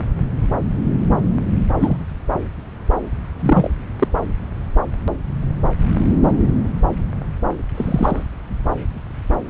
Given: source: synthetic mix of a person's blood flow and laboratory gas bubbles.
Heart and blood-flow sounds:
Doppler ultrasound of blood flow; subclavian vein
1.79-1.96 s: bubbles
3.40-3.68 s: bubbles
3.99-4.08 s: bubbles
7.75-8.23 s: bubbles
From the record:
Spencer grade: 2 (many but less than half of the cardiac periods contain bubble signals, singularly or in groups); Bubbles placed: anywhere in the cardiac cycle

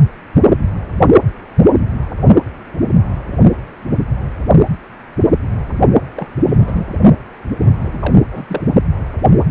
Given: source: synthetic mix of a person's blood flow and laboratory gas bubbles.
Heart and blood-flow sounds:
Doppler ultrasound of blood flow; precordium
6.16-6.28 s: bubbles
6.37-6.88 s: bubbles
7.60-7.74 s: bubbles
7.77-8.15 s: bubbles
8.31-8.61 s: bubbles
From the record:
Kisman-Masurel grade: 222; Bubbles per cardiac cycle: several, 3 to 8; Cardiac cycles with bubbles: 10 to 50%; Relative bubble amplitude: moderate (0.250 to 0.450); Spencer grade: 2 (many but less than half of the cardiac periods contain bubble signals, singularly or in groups); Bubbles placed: only in the low amplitude regions of the cardiac cycle

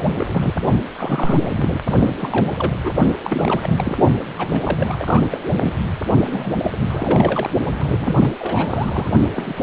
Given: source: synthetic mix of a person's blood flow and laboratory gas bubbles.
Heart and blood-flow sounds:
Doppler ultrasound of blood flow; precordium
0.00-0.53 s: bubbles
0.97-1.81 s: bubbles
1.92-2.13 s: bubbles
2.19-2.52 s: bubbles
2.56-2.72 s: bubbles
2.84-2.92 s: bubbles
3.24-3.97 s: bubbles
4.38-4.61 s: bubbles
4.63-5.38 s: bubbles
5.53-5.78 s: bubbles
6.24-6.53 s: bubbles
6.58-6.72 s: bubbles
6.86-7.50 s: bubbles
7.79-8.31 s: bubbles
8.39-9.08 s: bubbles
9.29-9.63 s: bubbles
From the record:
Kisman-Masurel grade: 332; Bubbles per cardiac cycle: rolling drumbeat, 9 or more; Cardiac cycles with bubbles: 50 to 99%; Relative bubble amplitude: moderate (0.250 to 0.450); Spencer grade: 3 (all of the cardiac periods contain showers or single bubble signals, but not dominating or overriding the cardiac motion signals); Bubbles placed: only in the low amplitude regions of the cardiac cycle

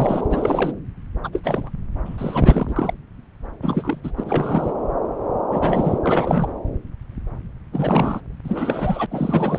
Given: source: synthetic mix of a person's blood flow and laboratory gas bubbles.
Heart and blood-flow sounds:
Doppler ultrasound of blood flow; subclavian vein
0.00-0.27 s: bubbles
0.30-0.72 s: bubbles
1.23-1.29 s: bubbles
1.32-1.41 s: bubbles
1.43-1.69 s: bubbles
2.05-2.94 s: bubbles
3.62-4.00 s: bubbles
4.04-4.11 s: bubbles
4.17-4.74 s: bubbles
5.51-5.99 s: bubbles
6.03-6.48 s: bubbles
7.72-8.21 s: bubbles
8.44-9.06 s: bubbles
9.11-9.59 s: bubbles
From the record:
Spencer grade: 3 (all of the cardiac periods contain showers or single bubble signals, but not dominating or overriding the cardiac motion signals); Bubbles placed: anywhere in the cardiac cycle

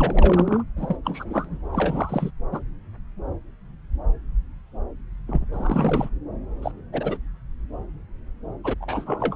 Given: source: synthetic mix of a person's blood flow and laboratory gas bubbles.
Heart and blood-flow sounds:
Doppler ultrasound of blood flow; subclavian vein
0.00-0.63 s: bubbles
0.76-0.97 s: bubbles
1.04-1.58 s: bubbles
1.72-2.31 s: bubbles
2.51-2.60 s: bubbles
5.27-5.45 s: bubbles
5.53-6.10 s: bubbles
6.62-6.71 s: bubbles
6.92-7.17 s: bubbles
8.63-8.75 s: bubbles
8.80-9.36 s: bubbles
From the record:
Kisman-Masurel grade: 232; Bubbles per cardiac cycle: several, 3 to 8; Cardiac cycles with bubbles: 50 to 99%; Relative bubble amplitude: moderate (0.250 to 0.450); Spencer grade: 3 (all of the cardiac periods contain showers or single bubble signals, but not dominating or overriding the cardiac motion signals); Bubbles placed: anywhere in the cardiac cycle

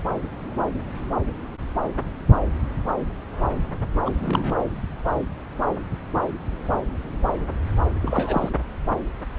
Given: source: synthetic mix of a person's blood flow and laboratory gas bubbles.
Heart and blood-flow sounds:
Doppler ultrasound of blood flow; subclavian vein
4.04-4.54 s: bubbles
8.01-8.50 s: bubbles
From the record:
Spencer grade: 1 (occasional bubble signal discernible with the cardiac motion signal, with majority of cardiac periods free of bubbles); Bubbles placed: anywhere in the cardiac cycle

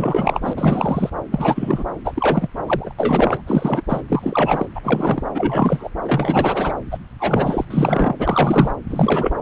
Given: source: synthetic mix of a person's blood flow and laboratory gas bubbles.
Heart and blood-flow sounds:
Doppler ultrasound of blood flow; subclavian vein
0.00-0.53 s: bubbles
0.56-1.10 s: bubbles
1.31-1.84 s: bubbles
2.04-2.48 s: bubbles
2.66-2.94 s: bubbles
2.98-3.42 s: bubbles
3.46-3.82 s: bubbles
3.88-4.02 s: bubbles
4.08-4.66 s: bubbles
4.75-4.81 s: bubbles
4.83-5.23 s: bubbles
5.34-5.89 s: bubbles
6.03-6.73 s: bubbles
6.91-6.98 s: bubbles
7.20-7.65 s: bubbles
7.70-8.13 s: bubbles
8.19-8.71 s: bubbles
8.89-9.33 s: bubbles
From the record:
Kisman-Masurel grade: 342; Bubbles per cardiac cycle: rolling drumbeat, 9 or more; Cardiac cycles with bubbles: 100%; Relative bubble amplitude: moderate (0.250 to 0.450); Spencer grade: 3 (all of the cardiac periods contain showers or single bubble signals, but not dominating or overriding the cardiac motion signals); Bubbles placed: anywhere in the cardiac cycle

